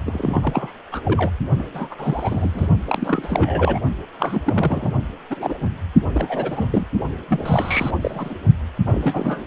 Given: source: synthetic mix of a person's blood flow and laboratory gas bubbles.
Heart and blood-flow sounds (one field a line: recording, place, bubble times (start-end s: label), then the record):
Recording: Doppler ultrasound of blood flow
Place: precordium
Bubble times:
0.06-0.39 s: bubbles
0.43-0.72 s: bubbles
0.92-1.02 s: bubbles
1.04-1.30 s: bubbles
1.58-1.67 s: bubbles
1.74-1.89 s: bubbles
1.91-1.95 s: bubbles
1.98-2.67 s: bubbles
2.86-3.80 s: bubbles
4.20-4.95 s: bubbles
5.30-5.57 s: bubbles
6.13-6.69 s: bubbles
6.72-6.87 s: bubbles
7.28-7.90 s: bubbles
8.01-8.34 s: bubbles
8.86-9.43 s: bubbles
From the record:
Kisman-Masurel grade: 342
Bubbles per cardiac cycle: rolling drumbeat, 9 or more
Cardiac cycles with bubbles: 100%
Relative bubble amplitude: moderate (0.250 to 0.450)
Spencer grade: 3 (all of the cardiac periods contain showers or single bubble signals, but not dominating or overriding the cardiac motion signals)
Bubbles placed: only in the low amplitude regions of the cardiac cycle